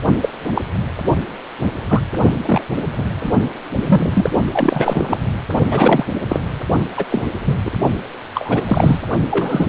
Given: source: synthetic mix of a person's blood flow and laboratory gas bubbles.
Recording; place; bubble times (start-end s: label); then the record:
Doppler ultrasound of blood flow; precordium
0.21-0.29 s: bubbles
0.54-0.61 s: bubbles
1.89-2.02 s: bubbles
2.45-2.61 s: bubbles
2.98-3.05 s: bubbles
3.23-3.34 s: bubbles
3.78-4.29 s: bubbles
4.53-5.17 s: bubbles
5.71-6.05 s: bubbles
6.29-6.42 s: bubbles
6.96-7.23 s: bubbles
7.45-7.58 s: bubbles
7.64-7.71 s: bubbles
8.34-8.62 s: bubbles
8.68-8.99 s: bubbles
9.31-9.69 s: bubbles
From the record:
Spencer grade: 3 (all of the cardiac periods contain showers or single bubble signals, but not dominating or overriding the cardiac motion signals); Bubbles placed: only in the low amplitude regions of the cardiac cycle